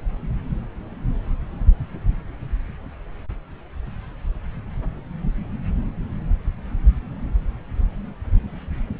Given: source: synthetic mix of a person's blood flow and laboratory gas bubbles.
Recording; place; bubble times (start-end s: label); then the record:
Doppler ultrasound of blood flow; subclavian vein
no bubbles
From the record:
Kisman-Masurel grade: 000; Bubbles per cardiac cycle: 0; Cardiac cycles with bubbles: 0%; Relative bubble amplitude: no bubbles discernible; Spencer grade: 0 (complete lack of bubble signals)